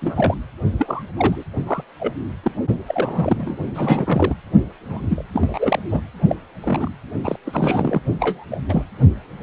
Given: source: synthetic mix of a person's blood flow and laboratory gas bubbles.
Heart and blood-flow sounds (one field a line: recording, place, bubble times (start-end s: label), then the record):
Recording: Doppler ultrasound of blood flow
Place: precordium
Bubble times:
0.01-0.35 s: bubbles
0.79-1.03 s: bubbles
1.17-1.44 s: bubbles
1.67-1.83 s: bubbles
2.00-2.14 s: bubbles
2.43-2.52 s: bubbles
2.88-3.56 s: bubbles
3.75-4.36 s: bubbles
4.88-5.23 s: bubbles
5.33-5.79 s: bubbles
5.89-6.01 s: bubbles
6.29-6.35 s: bubbles
6.62-6.89 s: bubbles
7.24-7.36 s: bubbles
7.46-8.00 s: bubbles
8.20-8.45 s: bubbles
8.51-8.57 s: bubbles
8.68-8.84 s: bubbles
From the record:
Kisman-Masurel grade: 232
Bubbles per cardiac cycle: several, 3 to 8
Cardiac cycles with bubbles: 50 to 99%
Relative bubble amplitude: moderate (0.250 to 0.450)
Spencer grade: 3 (all of the cardiac periods contain showers or single bubble signals, but not dominating or overriding the cardiac motion signals)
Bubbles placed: only in the low amplitude regions of the cardiac cycle